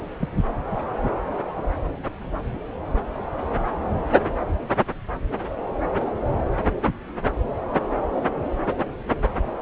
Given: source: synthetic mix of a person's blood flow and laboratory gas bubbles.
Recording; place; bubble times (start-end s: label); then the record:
Doppler ultrasound of blood flow; subclavian vein
0.20-0.29 s: bubbles
From the record:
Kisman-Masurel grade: 112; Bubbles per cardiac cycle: 1 to 2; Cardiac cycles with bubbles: 1 to 10%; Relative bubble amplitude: moderate (0.250 to 0.450); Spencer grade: 1 (occasional bubble signal discernible with the cardiac motion signal, with majority of cardiac periods free of bubbles); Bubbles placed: anywhere in the cardiac cycle